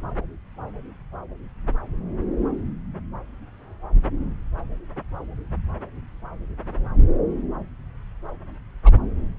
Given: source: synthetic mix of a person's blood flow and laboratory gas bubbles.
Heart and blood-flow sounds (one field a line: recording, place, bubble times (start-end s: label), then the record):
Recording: Doppler ultrasound of blood flow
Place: subclavian vein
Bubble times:
8.84-8.98 s: bubbles
From the record:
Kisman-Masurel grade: 111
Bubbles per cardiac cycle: 1 to 2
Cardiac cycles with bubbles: 1 to 10%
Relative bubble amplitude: barely perceptible (0.100 to 0.250)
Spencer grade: 1 (occasional bubble signal discernible with the cardiac motion signal, with majority of cardiac periods free of bubbles)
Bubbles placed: anywhere in the cardiac cycle